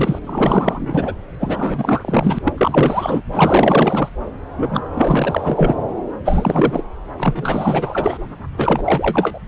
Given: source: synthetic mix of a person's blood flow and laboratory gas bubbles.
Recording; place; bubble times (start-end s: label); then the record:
Doppler ultrasound of blood flow; subclavian vein
0.00-0.19 s: bubbles
0.26-1.15 s: bubbles
1.40-2.39 s: bubbles
2.45-2.55 s: bubbles
2.58-3.22 s: bubbles
3.32-4.10 s: bubbles
4.56-4.82 s: bubbles
4.93-5.87 s: bubbles
6.24-6.82 s: bubbles
7.17-8.21 s: bubbles
8.56-9.39 s: bubbles
From the record:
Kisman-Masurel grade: 444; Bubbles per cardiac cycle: continuous sound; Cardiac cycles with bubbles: 100%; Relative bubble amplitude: maximal (0.775 to 0.999); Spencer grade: 4 (maximum detectable bubble signal sounding continuously throughout systole and diastole of every cardiac period, and overriding the amplitude of the normal cardiac signals); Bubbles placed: anywhere in the cardiac cycle